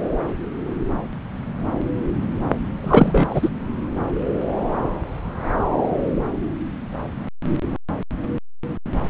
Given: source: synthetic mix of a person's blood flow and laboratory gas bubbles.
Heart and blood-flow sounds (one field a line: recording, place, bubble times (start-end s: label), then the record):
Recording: Doppler ultrasound of blood flow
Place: subclavian vein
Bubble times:
2.83-3.50 s: bubbles
From the record:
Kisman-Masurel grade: 213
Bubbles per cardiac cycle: several, 3 to 8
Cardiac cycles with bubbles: 1 to 10%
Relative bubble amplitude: loud (0.450 to 0.775)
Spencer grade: 1 (occasional bubble signal discernible with the cardiac motion signal, with majority of cardiac periods free of bubbles)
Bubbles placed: anywhere in the cardiac cycle